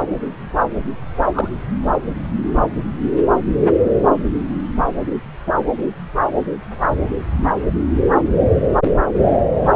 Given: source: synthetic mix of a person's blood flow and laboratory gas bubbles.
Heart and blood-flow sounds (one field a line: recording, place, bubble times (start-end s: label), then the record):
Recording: Doppler ultrasound of blood flow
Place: subclavian vein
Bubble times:
1.33-1.48 s: bubbles
From the record:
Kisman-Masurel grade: 112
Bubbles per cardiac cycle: 1 to 2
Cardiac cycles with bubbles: 1 to 10%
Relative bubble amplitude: moderate (0.250 to 0.450)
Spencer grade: 1 (occasional bubble signal discernible with the cardiac motion signal, with majority of cardiac periods free of bubbles)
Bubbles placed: anywhere in the cardiac cycle